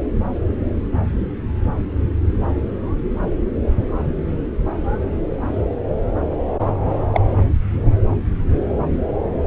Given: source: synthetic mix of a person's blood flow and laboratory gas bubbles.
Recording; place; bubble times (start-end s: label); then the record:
Doppler ultrasound of blood flow; subclavian vein
7.12-7.21 s: bubbles
From the record:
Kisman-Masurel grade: 112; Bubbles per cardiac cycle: 1 to 2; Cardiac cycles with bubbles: 1 to 10%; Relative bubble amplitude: moderate (0.250 to 0.450); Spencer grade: 1 (occasional bubble signal discernible with the cardiac motion signal, with majority of cardiac periods free of bubbles); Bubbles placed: anywhere in the cardiac cycle